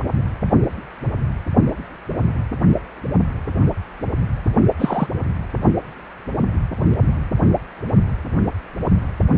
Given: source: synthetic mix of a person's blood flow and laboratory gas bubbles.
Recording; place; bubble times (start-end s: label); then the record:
Doppler ultrasound of blood flow; precordium
4.79-5.07 s: bubbles
From the record:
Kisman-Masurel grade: 123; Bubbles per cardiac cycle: 1 to 2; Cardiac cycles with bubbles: 10 to 50%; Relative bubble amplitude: loud (0.450 to 0.775); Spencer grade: 2 (many but less than half of the cardiac periods contain bubble signals, singularly or in groups); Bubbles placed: only in the low amplitude regions of the cardiac cycle